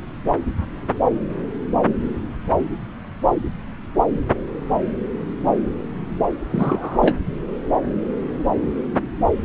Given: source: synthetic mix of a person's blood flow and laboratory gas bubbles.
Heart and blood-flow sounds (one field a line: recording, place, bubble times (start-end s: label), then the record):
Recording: Doppler ultrasound of blood flow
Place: subclavian vein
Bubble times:
6.52-6.98 s: bubbles
7.00-7.16 s: bubbles
From the record:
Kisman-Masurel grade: 212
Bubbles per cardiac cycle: several, 3 to 8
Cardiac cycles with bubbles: 1 to 10%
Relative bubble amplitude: moderate (0.250 to 0.450)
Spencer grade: 1 (occasional bubble signal discernible with the cardiac motion signal, with majority of cardiac periods free of bubbles)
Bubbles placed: anywhere in the cardiac cycle